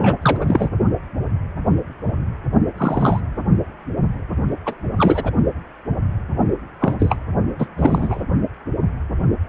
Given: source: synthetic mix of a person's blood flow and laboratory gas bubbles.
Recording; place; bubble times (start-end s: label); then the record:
Doppler ultrasound of blood flow; precordium
0.00-0.18 s: bubbles
0.22-0.71 s: bubbles
2.77-3.21 s: bubbles
4.66-4.76 s: bubbles
4.97-5.32 s: bubbles
6.80-6.94 s: bubbles
6.99-7.17 s: bubbles
7.58-7.68 s: bubbles
7.78-8.24 s: bubbles
From the record:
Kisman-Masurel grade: 233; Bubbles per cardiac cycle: several, 3 to 8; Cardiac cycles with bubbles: 50 to 99%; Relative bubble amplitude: loud (0.450 to 0.775); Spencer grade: 3 (all of the cardiac periods contain showers or single bubble signals, but not dominating or overriding the cardiac motion signals); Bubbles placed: only in the low amplitude regions of the cardiac cycle